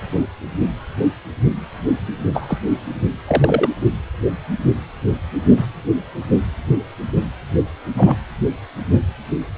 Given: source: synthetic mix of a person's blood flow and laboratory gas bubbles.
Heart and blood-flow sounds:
Doppler ultrasound of blood flow; precordium
2.34-2.58 s: bubbles
3.27-3.69 s: bubbles
5.57-5.67 s: bubbles
7.97-8.15 s: bubbles
From the record:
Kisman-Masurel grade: 123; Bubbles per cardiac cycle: 1 to 2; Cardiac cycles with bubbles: 10 to 50%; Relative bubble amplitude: loud (0.450 to 0.775); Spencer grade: 2 (many but less than half of the cardiac periods contain bubble signals, singularly or in groups); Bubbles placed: anywhere in the cardiac cycle

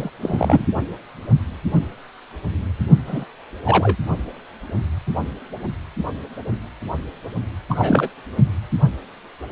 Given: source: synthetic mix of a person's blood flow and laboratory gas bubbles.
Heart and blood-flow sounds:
Doppler ultrasound of blood flow; precordium
0.00-0.10 s: bubbles
0.21-0.65 s: bubbles
3.07-3.24 s: bubbles
3.65-3.96 s: bubbles
7.70-8.08 s: bubbles
From the record:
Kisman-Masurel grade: 222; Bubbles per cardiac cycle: several, 3 to 8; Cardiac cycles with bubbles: 10 to 50%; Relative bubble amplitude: moderate (0.250 to 0.450); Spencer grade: 2 (many but less than half of the cardiac periods contain bubble signals, singularly or in groups); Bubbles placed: only in the low amplitude regions of the cardiac cycle

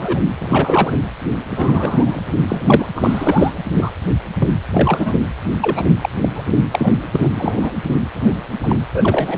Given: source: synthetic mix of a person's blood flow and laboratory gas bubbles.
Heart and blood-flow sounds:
Doppler ultrasound of blood flow; precordium
0.00-0.23 s: bubbles
0.39-0.96 s: bubbles
1.50-2.21 s: bubbles
2.48-2.85 s: bubbles
2.94-3.54 s: bubbles
3.77-3.91 s: bubbles
4.40-4.49 s: bubbles
4.72-5.14 s: bubbles
5.61-5.84 s: bubbles
6.01-6.09 s: bubbles
6.21-6.30 s: bubbles
6.34-6.41 s: bubbles
6.72-6.93 s: bubbles
7.11-7.31 s: bubbles
7.35-7.71 s: bubbles
8.14-8.45 s: bubbles
8.63-8.76 s: bubbles
8.94-9.38 s: bubbles
From the record:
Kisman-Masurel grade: 243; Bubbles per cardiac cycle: several, 3 to 8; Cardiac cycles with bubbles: 100%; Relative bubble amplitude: loud (0.450 to 0.775); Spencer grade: 3 (all of the cardiac periods contain showers or single bubble signals, but not dominating or overriding the cardiac motion signals); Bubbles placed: anywhere in the cardiac cycle

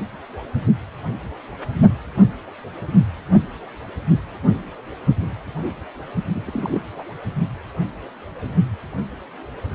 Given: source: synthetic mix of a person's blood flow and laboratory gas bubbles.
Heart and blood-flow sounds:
Doppler ultrasound of blood flow; precordium
6.35-6.41 s: bubbles
6.46-6.80 s: bubbles
6.96-7.04 s: bubbles
From the record:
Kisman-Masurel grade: 211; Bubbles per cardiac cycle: several, 3 to 8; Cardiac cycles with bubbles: 1 to 10%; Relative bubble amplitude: barely perceptible (0.100 to 0.250); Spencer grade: 1 (occasional bubble signal discernible with the cardiac motion signal, with majority of cardiac periods free of bubbles); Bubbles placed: only in the low amplitude regions of the cardiac cycle

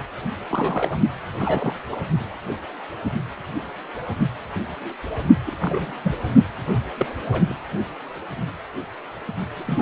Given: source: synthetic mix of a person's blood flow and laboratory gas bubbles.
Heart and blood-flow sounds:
Doppler ultrasound of blood flow; precordium
0.49-0.98 s: bubbles
1.38-1.75 s: bubbles
1.91-1.95 s: bubbles
5.46-5.92 s: bubbles
6.03-6.15 s: bubbles
6.71-6.85 s: bubbles
6.97-7.07 s: bubbles
7.31-7.54 s: bubbles
9.55-9.82 s: bubbles
From the record:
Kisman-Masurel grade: 232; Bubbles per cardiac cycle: several, 3 to 8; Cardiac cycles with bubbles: 50 to 99%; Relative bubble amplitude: moderate (0.250 to 0.450); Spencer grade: 3 (all of the cardiac periods contain showers or single bubble signals, but not dominating or overriding the cardiac motion signals); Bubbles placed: only in the low amplitude regions of the cardiac cycle

